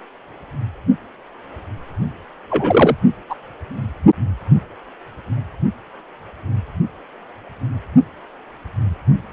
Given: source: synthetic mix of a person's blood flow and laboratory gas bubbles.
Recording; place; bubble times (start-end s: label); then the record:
Doppler ultrasound of blood flow; precordium
2.49-2.96 s: bubbles
3.29-3.35 s: bubbles
From the record:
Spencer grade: 2 (many but less than half of the cardiac periods contain bubble signals, singularly or in groups); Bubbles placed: only in the low amplitude regions of the cardiac cycle